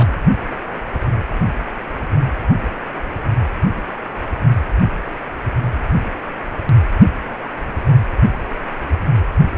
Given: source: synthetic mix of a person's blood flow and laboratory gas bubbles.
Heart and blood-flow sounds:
Doppler ultrasound of blood flow; precordium
0.00-0.13 s: bubbles
From the record:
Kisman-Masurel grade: 211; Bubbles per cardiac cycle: several, 3 to 8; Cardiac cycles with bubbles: 1 to 10%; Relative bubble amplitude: barely perceptible (0.100 to 0.250); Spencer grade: 1 (occasional bubble signal discernible with the cardiac motion signal, with majority of cardiac periods free of bubbles); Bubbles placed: anywhere in the cardiac cycle

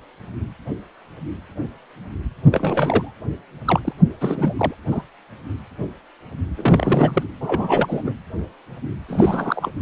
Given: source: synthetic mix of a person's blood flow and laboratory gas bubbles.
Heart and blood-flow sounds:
Doppler ultrasound of blood flow; precordium
2.51-3.12 s: bubbles
3.65-3.79 s: bubbles
3.85-3.92 s: bubbles
4.21-4.54 s: bubbles
4.57-4.75 s: bubbles
4.92-5.04 s: bubbles
6.57-7.24 s: bubbles
7.40-8.12 s: bubbles
9.08-9.71 s: bubbles
From the record:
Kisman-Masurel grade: 332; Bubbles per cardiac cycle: rolling drumbeat, 9 or more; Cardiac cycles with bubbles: 50 to 99%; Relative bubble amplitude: moderate (0.250 to 0.450); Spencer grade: 3 (all of the cardiac periods contain showers or single bubble signals, but not dominating or overriding the cardiac motion signals); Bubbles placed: anywhere in the cardiac cycle

